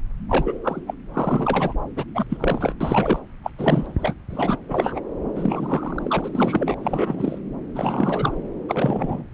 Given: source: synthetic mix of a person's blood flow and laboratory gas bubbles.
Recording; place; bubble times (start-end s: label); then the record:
Doppler ultrasound of blood flow; subclavian vein
0.29-0.57 s: bubbles
0.64-0.80 s: bubbles
0.87-0.94 s: bubbles
1.13-1.75 s: bubbles
1.96-2.04 s: bubbles
2.15-2.24 s: bubbles
2.29-2.74 s: bubbles
2.80-3.19 s: bubbles
3.44-3.50 s: bubbles
3.58-4.14 s: bubbles
4.30-4.57 s: bubbles
4.69-5.00 s: bubbles
5.35-6.75 s: bubbles
6.81-7.39 s: bubbles
7.75-8.38 s: bubbles
8.68-9.24 s: bubbles
From the record:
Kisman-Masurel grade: 342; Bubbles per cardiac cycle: rolling drumbeat, 9 or more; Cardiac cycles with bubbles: 100%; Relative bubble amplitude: moderate (0.250 to 0.450); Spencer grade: 3 (all of the cardiac periods contain showers or single bubble signals, but not dominating or overriding the cardiac motion signals); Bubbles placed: anywhere in the cardiac cycle